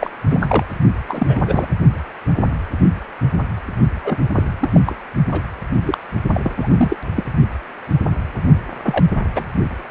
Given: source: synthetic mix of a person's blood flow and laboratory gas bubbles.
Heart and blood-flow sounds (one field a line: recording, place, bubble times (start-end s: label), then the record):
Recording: Doppler ultrasound of blood flow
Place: precordium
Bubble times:
0.00-0.10 s: bubbles
0.29-0.64 s: bubbles
1.07-1.67 s: bubbles
4.04-4.17 s: bubbles
4.34-4.43 s: bubbles
4.59-4.69 s: bubbles
4.72-4.80 s: bubbles
4.86-4.98 s: bubbles
5.29-5.46 s: bubbles
5.82-5.98 s: bubbles
6.33-6.96 s: bubbles
7.16-7.24 s: bubbles
8.84-9.06 s: bubbles
9.35-9.46 s: bubbles
From the record:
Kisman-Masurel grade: 232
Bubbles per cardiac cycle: several, 3 to 8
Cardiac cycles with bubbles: 50 to 99%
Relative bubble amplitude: moderate (0.250 to 0.450)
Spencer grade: 3 (all of the cardiac periods contain showers or single bubble signals, but not dominating or overriding the cardiac motion signals)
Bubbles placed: only in the low amplitude regions of the cardiac cycle